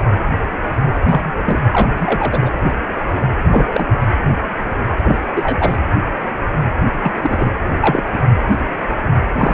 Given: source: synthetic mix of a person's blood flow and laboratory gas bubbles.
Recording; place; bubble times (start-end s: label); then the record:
Doppler ultrasound of blood flow; precordium
1.06-1.32 s: bubbles
1.46-1.59 s: bubbles
1.72-1.88 s: bubbles
2.00-2.50 s: bubbles
3.49-3.86 s: bubbles
5.00-5.17 s: bubbles
5.35-5.78 s: bubbles
7.00-7.53 s: bubbles
7.68-7.71 s: bubbles
7.80-8.04 s: bubbles
8.13-8.19 s: bubbles
9.37-9.54 s: bubbles
From the record:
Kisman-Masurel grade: 233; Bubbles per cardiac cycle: several, 3 to 8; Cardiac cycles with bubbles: 50 to 99%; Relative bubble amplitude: loud (0.450 to 0.775); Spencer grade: 3 (all of the cardiac periods contain showers or single bubble signals, but not dominating or overriding the cardiac motion signals); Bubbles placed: anywhere in the cardiac cycle